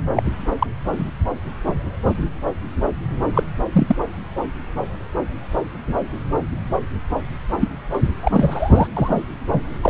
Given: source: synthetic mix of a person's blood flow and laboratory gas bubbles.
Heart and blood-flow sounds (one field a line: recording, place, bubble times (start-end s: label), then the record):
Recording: Doppler ultrasound of blood flow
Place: subclavian vein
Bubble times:
0.00-0.04 s: bubbles
0.13-0.23 s: bubbles
0.59-0.67 s: bubbles
3.35-3.44 s: bubbles
3.73-3.96 s: bubbles
7.60-7.68 s: bubbles
8.23-8.88 s: bubbles
8.96-9.26 s: bubbles
9.81-9.90 s: bubbles
From the record:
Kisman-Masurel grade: 233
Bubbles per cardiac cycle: several, 3 to 8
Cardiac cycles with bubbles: 50 to 99%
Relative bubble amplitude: loud (0.450 to 0.775)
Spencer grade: 3 (all of the cardiac periods contain showers or single bubble signals, but not dominating or overriding the cardiac motion signals)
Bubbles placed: anywhere in the cardiac cycle